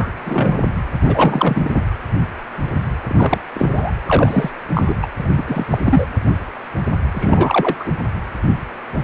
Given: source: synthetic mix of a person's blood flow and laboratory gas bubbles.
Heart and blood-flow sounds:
Doppler ultrasound of blood flow; precordium
0.00-0.11 s: bubbles
0.26-0.61 s: bubbles
1.02-1.71 s: bubbles
1.75-1.82 s: bubbles
3.08-3.38 s: bubbles
3.54-3.93 s: bubbles
4.06-4.51 s: bubbles
4.74-4.94 s: bubbles
5.02-5.06 s: bubbles
5.19-5.29 s: bubbles
5.36-5.43 s: bubbles
5.46-5.66 s: bubbles
5.71-5.78 s: bubbles
5.86-6.05 s: bubbles
7.13-7.93 s: bubbles
From the record:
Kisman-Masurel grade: 233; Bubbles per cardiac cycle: several, 3 to 8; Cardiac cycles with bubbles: 50 to 99%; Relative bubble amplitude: loud (0.450 to 0.775); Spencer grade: 3 (all of the cardiac periods contain showers or single bubble signals, but not dominating or overriding the cardiac motion signals); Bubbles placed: anywhere in the cardiac cycle

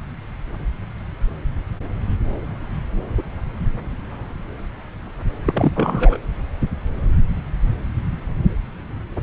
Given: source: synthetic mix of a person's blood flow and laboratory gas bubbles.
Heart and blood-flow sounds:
Doppler ultrasound of blood flow; subclavian vein
5.45-5.72 s: bubbles
5.75-6.18 s: bubbles
From the record:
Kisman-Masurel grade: 213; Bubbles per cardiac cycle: several, 3 to 8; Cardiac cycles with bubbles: 1 to 10%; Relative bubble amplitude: loud (0.450 to 0.775); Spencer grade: 1 (occasional bubble signal discernible with the cardiac motion signal, with majority of cardiac periods free of bubbles); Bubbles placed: anywhere in the cardiac cycle

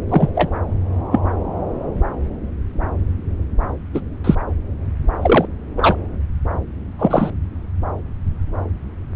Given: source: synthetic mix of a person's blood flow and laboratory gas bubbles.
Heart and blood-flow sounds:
Doppler ultrasound of blood flow; subclavian vein
0.09-0.29 s: bubbles
0.35-0.50 s: bubbles
1.11-1.20 s: bubbles
3.94-4.00 s: bubbles
4.24-4.35 s: bubbles
5.21-5.45 s: bubbles
5.76-5.96 s: bubbles
6.98-7.30 s: bubbles
From the record:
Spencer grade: 2 (many but less than half of the cardiac periods contain bubble signals, singularly or in groups); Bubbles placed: anywhere in the cardiac cycle

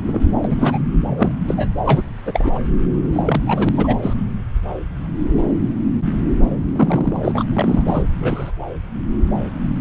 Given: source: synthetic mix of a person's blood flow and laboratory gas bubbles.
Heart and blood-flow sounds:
Doppler ultrasound of blood flow; subclavian vein
0.06-0.20 s: bubbles
0.44-0.80 s: bubbles
1.17-1.32 s: bubbles
1.47-1.68 s: bubbles
1.85-2.03 s: bubbles
2.25-2.52 s: bubbles
2.54-2.59 s: bubbles
3.12-3.41 s: bubbles
3.46-3.69 s: bubbles
3.74-3.96 s: bubbles
4.02-4.13 s: bubbles
6.74-7.44 s: bubbles
7.53-7.83 s: bubbles
7.88-8.03 s: bubbles
8.20-8.51 s: bubbles
From the record:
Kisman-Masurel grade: 232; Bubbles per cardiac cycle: several, 3 to 8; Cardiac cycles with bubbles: 50 to 99%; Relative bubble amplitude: moderate (0.250 to 0.450); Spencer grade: 3 (all of the cardiac periods contain showers or single bubble signals, but not dominating or overriding the cardiac motion signals); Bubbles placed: anywhere in the cardiac cycle

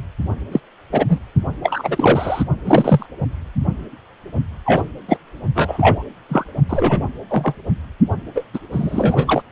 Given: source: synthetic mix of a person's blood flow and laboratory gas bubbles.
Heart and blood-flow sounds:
Doppler ultrasound of blood flow; precordium
0.00-0.03 s: bubbles
0.52-0.60 s: bubbles
0.92-1.06 s: bubbles
1.08-1.19 s: bubbles
1.63-2.44 s: bubbles
2.65-3.06 s: bubbles
4.65-4.83 s: bubbles
5.08-5.17 s: bubbles
5.54-6.03 s: bubbles
6.29-6.45 s: bubbles
6.69-7.07 s: bubbles
7.29-7.54 s: bubbles
8.35-8.45 s: bubbles
8.54-8.59 s: bubbles
8.72-9.42 s: bubbles
From the record:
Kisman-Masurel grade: 233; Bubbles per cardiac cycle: several, 3 to 8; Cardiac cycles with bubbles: 50 to 99%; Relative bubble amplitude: loud (0.450 to 0.775); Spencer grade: 3 (all of the cardiac periods contain showers or single bubble signals, but not dominating or overriding the cardiac motion signals); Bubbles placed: only in the low amplitude regions of the cardiac cycle

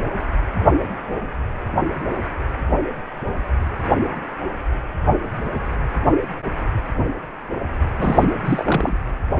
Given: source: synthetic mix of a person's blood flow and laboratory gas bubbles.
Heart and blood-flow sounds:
Doppler ultrasound of blood flow; precordium
7.98-8.25 s: bubbles
8.45-8.97 s: bubbles
From the record:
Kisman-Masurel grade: 212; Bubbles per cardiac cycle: several, 3 to 8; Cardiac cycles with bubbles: 1 to 10%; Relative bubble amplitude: moderate (0.250 to 0.450); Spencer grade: 1 (occasional bubble signal discernible with the cardiac motion signal, with majority of cardiac periods free of bubbles); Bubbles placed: anywhere in the cardiac cycle

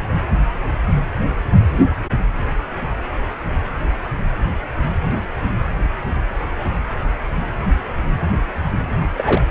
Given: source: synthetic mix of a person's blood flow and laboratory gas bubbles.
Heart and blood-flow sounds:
Doppler ultrasound of blood flow; precordium
9.17-9.41 s: bubbles
From the record:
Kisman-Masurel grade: 212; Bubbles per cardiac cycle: several, 3 to 8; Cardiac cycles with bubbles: 1 to 10%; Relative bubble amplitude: moderate (0.250 to 0.450); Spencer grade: 1 (occasional bubble signal discernible with the cardiac motion signal, with majority of cardiac periods free of bubbles); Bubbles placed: anywhere in the cardiac cycle

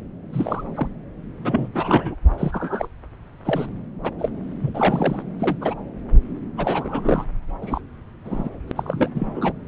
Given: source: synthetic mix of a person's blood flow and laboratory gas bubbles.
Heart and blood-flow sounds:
Doppler ultrasound of blood flow; subclavian vein
0.32-0.64 s: bubbles
0.74-0.87 s: bubbles
1.44-1.68 s: bubbles
1.75-2.15 s: bubbles
2.38-2.88 s: bubbles
3.44-3.67 s: bubbles
4.03-4.12 s: bubbles
4.19-4.29 s: bubbles
4.62-4.71 s: bubbles
4.74-5.22 s: bubbles
5.39-5.58 s: bubbles
5.60-5.75 s: bubbles
6.57-7.25 s: bubbles
7.61-7.80 s: bubbles
8.24-8.50 s: bubbles
8.68-8.71 s: bubbles
8.75-9.53 s: bubbles
From the record:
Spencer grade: 3 (all of the cardiac periods contain showers or single bubble signals, but not dominating or overriding the cardiac motion signals); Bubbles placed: anywhere in the cardiac cycle

